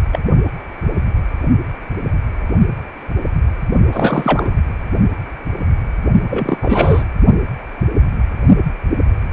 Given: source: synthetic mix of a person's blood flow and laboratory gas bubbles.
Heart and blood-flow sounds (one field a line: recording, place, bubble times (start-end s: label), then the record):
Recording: Doppler ultrasound of blood flow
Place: precordium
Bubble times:
0.12-0.21 s: bubbles
3.92-4.54 s: bubbles
6.27-6.58 s: bubbles
6.62-7.04 s: bubbles
From the record:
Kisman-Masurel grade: 223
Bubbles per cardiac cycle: several, 3 to 8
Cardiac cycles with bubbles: 10 to 50%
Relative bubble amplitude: loud (0.450 to 0.775)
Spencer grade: 2 (many but less than half of the cardiac periods contain bubble signals, singularly or in groups)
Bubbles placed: only in the low amplitude regions of the cardiac cycle